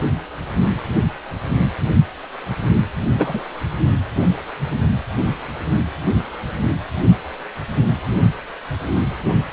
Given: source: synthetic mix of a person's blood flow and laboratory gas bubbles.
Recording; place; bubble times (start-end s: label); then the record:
Doppler ultrasound of blood flow; precordium
3.17-3.42 s: bubbles
From the record:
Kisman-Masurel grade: 113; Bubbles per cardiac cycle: 1 to 2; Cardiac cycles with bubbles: 1 to 10%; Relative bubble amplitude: loud (0.450 to 0.775); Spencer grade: 1 (occasional bubble signal discernible with the cardiac motion signal, with majority of cardiac periods free of bubbles); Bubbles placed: anywhere in the cardiac cycle